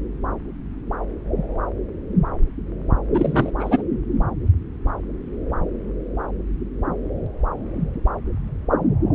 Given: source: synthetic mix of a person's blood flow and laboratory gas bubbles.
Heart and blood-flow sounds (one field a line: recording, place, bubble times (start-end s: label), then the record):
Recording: Doppler ultrasound of blood flow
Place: subclavian vein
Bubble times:
3.14-3.52 s: bubbles
3.59-3.82 s: bubbles
From the record:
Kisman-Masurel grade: 213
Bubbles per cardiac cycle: several, 3 to 8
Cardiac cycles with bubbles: 1 to 10%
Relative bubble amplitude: loud (0.450 to 0.775)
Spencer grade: 1 (occasional bubble signal discernible with the cardiac motion signal, with majority of cardiac periods free of bubbles)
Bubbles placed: anywhere in the cardiac cycle